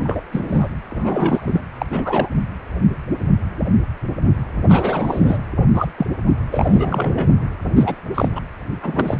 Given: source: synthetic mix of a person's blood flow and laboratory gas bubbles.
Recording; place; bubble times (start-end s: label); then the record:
Doppler ultrasound of blood flow; precordium
0.00-0.21 s: bubbles
0.32-0.69 s: bubbles
0.90-1.63 s: bubbles
1.78-1.86 s: bubbles
1.90-2.29 s: bubbles
4.69-5.39 s: bubbles
5.73-5.87 s: bubbles
5.97-6.06 s: bubbles
6.51-7.31 s: bubbles
7.75-7.96 s: bubbles
8.14-8.29 s: bubbles
8.35-8.41 s: bubbles
8.82-9.18 s: bubbles
From the record:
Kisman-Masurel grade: 233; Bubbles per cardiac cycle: several, 3 to 8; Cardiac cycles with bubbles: 50 to 99%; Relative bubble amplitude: loud (0.450 to 0.775); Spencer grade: 3 (all of the cardiac periods contain showers or single bubble signals, but not dominating or overriding the cardiac motion signals); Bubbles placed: anywhere in the cardiac cycle